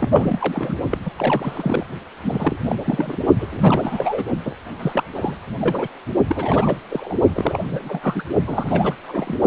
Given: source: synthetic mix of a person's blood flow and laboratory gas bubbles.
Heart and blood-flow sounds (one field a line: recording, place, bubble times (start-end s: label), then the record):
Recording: Doppler ultrasound of blood flow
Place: precordium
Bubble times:
0.00-0.09 s: bubbles
0.11-0.76 s: bubbles
0.91-0.98 s: bubbles
1.05-1.11 s: bubbles
1.17-1.86 s: bubbles
2.23-2.56 s: bubbles
2.65-2.75 s: bubbles
2.85-3.18 s: bubbles
3.40-3.48 s: bubbles
3.51-4.25 s: bubbles
4.45-4.54 s: bubbles
4.79-5.04 s: bubbles
5.15-5.35 s: bubbles
5.61-5.88 s: bubbles
6.29-6.75 s: bubbles
6.90-7.15 s: bubbles
7.34-7.59 s: bubbles
7.67-8.22 s: bubbles
8.47-8.94 s: bubbles
9.07-9.39 s: bubbles
From the record:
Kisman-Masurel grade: 332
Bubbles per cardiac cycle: rolling drumbeat, 9 or more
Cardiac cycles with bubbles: 50 to 99%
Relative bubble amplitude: moderate (0.250 to 0.450)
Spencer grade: 3 (all of the cardiac periods contain showers or single bubble signals, but not dominating or overriding the cardiac motion signals)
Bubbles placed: only in the low amplitude regions of the cardiac cycle